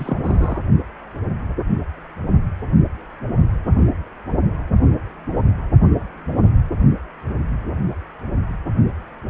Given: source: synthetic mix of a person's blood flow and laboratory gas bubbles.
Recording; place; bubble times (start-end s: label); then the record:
Doppler ultrasound of blood flow; precordium
0.00-0.60 s: bubbles
From the record:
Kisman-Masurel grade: 212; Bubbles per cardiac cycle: several, 3 to 8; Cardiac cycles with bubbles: 1 to 10%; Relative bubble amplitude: moderate (0.250 to 0.450); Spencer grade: 1 (occasional bubble signal discernible with the cardiac motion signal, with majority of cardiac periods free of bubbles); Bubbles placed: only in the low amplitude regions of the cardiac cycle